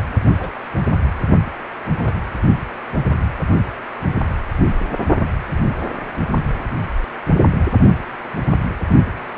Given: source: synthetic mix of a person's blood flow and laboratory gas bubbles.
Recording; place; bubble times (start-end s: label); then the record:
Doppler ultrasound of blood flow; precordium
0.38-0.50 s: bubbles
1.89-1.96 s: bubbles
1.99-2.15 s: bubbles
From the record:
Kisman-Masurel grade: 121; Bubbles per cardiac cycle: 1 to 2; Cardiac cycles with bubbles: 10 to 50%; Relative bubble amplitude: barely perceptible (0.100 to 0.250); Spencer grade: 2 (many but less than half of the cardiac periods contain bubble signals, singularly or in groups); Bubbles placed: only in the low amplitude regions of the cardiac cycle